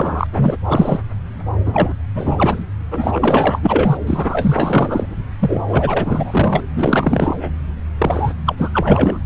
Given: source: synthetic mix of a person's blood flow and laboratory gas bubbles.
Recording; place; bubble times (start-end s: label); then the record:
Doppler ultrasound of blood flow; subclavian vein
0.00-0.27 s: bubbles
0.32-0.57 s: bubbles
0.66-1.01 s: bubbles
1.65-1.94 s: bubbles
2.14-2.65 s: bubbles
2.91-3.98 s: bubbles
4.07-5.16 s: bubbles
5.39-5.64 s: bubbles
5.67-6.61 s: bubbles
6.75-7.50 s: bubbles
7.98-8.32 s: bubbles
8.45-8.69 s: bubbles
8.72-9.20 s: bubbles
From the record:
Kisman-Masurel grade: 444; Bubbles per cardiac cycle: continuous sound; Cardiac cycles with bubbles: 100%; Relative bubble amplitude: maximal (0.775 to 0.999); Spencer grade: 4 (maximum detectable bubble signal sounding continuously throughout systole and diastole of every cardiac period, and overriding the amplitude of the normal cardiac signals); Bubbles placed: anywhere in the cardiac cycle